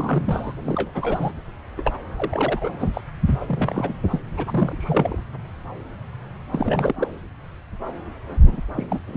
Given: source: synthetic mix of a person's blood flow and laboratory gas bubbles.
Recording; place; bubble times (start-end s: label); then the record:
Doppler ultrasound of blood flow; subclavian vein
0.00-0.55 s: bubbles
0.60-0.90 s: bubbles
0.94-1.36 s: bubbles
1.77-1.93 s: bubbles
2.17-2.91 s: bubbles
2.94-3.01 s: bubbles
3.29-3.93 s: bubbles
4.10-4.20 s: bubbles
4.37-5.17 s: bubbles
6.53-7.08 s: bubbles
8.40-8.61 s: bubbles
8.75-8.99 s: bubbles
9.06-9.17 s: bubbles
From the record:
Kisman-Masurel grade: 332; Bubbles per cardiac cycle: rolling drumbeat, 9 or more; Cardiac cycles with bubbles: 50 to 99%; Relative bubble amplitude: moderate (0.250 to 0.450); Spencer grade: 3 (all of the cardiac periods contain showers or single bubble signals, but not dominating or overriding the cardiac motion signals); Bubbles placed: anywhere in the cardiac cycle